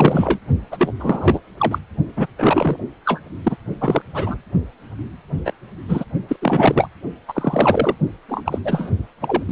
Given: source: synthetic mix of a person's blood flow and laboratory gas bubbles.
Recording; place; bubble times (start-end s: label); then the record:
Doppler ultrasound of blood flow; precordium
0.00-0.39 s: bubbles
0.71-0.93 s: bubbles
0.99-1.41 s: bubbles
1.57-1.78 s: bubbles
2.17-2.26 s: bubbles
2.38-2.77 s: bubbles
3.05-3.20 s: bubbles
3.43-3.57 s: bubbles
3.81-4.02 s: bubbles
4.13-4.37 s: bubbles
5.45-5.52 s: bubbles
5.88-6.04 s: bubbles
6.28-6.36 s: bubbles
6.42-6.88 s: bubbles
7.28-7.95 s: bubbles
8.28-8.59 s: bubbles
8.64-8.90 s: bubbles
9.21-9.44 s: bubbles
9.47-9.52 s: bubbles
From the record:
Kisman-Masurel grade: 233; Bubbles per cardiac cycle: several, 3 to 8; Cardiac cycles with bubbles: 50 to 99%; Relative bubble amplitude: loud (0.450 to 0.775); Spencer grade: 3 (all of the cardiac periods contain showers or single bubble signals, but not dominating or overriding the cardiac motion signals); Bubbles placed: only in the low amplitude regions of the cardiac cycle